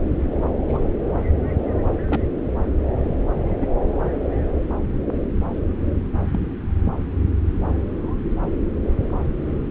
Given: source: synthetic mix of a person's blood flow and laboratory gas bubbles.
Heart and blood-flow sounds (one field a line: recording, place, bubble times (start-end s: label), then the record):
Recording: Doppler ultrasound of blood flow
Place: subclavian vein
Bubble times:
0.68-0.84 s: bubbles
2.05-2.21 s: bubbles
3.57-3.72 s: bubbles
6.32-6.42 s: bubbles
From the record:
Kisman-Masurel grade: 121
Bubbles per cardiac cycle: 1 to 2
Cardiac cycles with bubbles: 10 to 50%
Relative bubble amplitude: barely perceptible (0.100 to 0.250)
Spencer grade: 2 (many but less than half of the cardiac periods contain bubble signals, singularly or in groups)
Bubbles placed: anywhere in the cardiac cycle